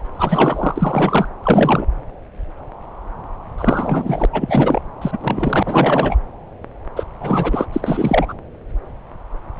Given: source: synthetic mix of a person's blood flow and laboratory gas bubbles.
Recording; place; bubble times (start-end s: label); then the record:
Doppler ultrasound of blood flow; subclavian vein
0.15-1.28 s: bubbles
1.43-1.85 s: bubbles
3.58-4.25 s: bubbles
4.33-4.80 s: bubbles
5.01-5.18 s: bubbles
5.21-6.16 s: bubbles
6.96-7.04 s: bubbles
7.21-7.66 s: bubbles
7.73-8.34 s: bubbles
From the record:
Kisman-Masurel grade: 333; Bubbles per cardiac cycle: rolling drumbeat, 9 or more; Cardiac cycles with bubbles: 50 to 99%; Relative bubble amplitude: loud (0.450 to 0.775); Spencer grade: 3 (all of the cardiac periods contain showers or single bubble signals, but not dominating or overriding the cardiac motion signals); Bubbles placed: anywhere in the cardiac cycle